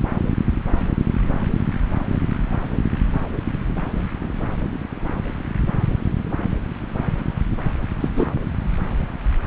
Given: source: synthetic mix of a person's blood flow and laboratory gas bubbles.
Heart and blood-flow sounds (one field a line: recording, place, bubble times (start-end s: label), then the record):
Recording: Doppler ultrasound of blood flow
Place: subclavian vein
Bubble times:
8.00-8.08 s: bubbles
8.14-8.28 s: bubbles
From the record:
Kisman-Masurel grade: 112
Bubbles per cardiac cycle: 1 to 2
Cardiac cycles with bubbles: 1 to 10%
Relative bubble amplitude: moderate (0.250 to 0.450)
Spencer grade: 1 (occasional bubble signal discernible with the cardiac motion signal, with majority of cardiac periods free of bubbles)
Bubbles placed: anywhere in the cardiac cycle